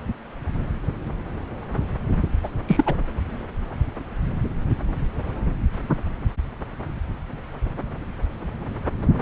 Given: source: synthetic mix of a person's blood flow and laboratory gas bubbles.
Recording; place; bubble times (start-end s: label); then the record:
Doppler ultrasound of blood flow; subclavian vein
2.43-2.48 s: bubbles
2.67-2.98 s: bubbles
From the record:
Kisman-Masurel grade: 212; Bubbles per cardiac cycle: several, 3 to 8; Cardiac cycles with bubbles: 1 to 10%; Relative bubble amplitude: moderate (0.250 to 0.450); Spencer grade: 1 (occasional bubble signal discernible with the cardiac motion signal, with majority of cardiac periods free of bubbles); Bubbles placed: anywhere in the cardiac cycle